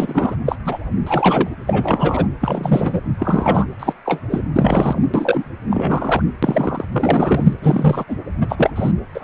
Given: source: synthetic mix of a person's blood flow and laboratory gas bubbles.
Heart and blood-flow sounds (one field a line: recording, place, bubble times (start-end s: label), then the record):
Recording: Doppler ultrasound of blood flow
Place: precordium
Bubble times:
0.00-0.36 s: bubbles
0.46-0.55 s: bubbles
0.65-0.79 s: bubbles
1.06-1.50 s: bubbles
1.67-2.28 s: bubbles
2.41-3.00 s: bubbles
3.19-3.65 s: bubbles
3.79-3.93 s: bubbles
4.06-4.20 s: bubbles
4.30-4.41 s: bubbles
4.56-4.99 s: bubbles
5.14-5.45 s: bubbles
5.70-6.23 s: bubbles
6.43-6.85 s: bubbles
6.92-7.53 s: bubbles
7.62-8.04 s: bubbles
8.08-8.16 s: bubbles
8.40-8.71 s: bubbles
8.75-8.91 s: bubbles
9.14-9.24 s: bubbles
From the record:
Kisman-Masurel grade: 243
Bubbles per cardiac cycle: several, 3 to 8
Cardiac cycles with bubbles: 100%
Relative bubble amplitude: loud (0.450 to 0.775)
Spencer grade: 3 (all of the cardiac periods contain showers or single bubble signals, but not dominating or overriding the cardiac motion signals)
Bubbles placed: anywhere in the cardiac cycle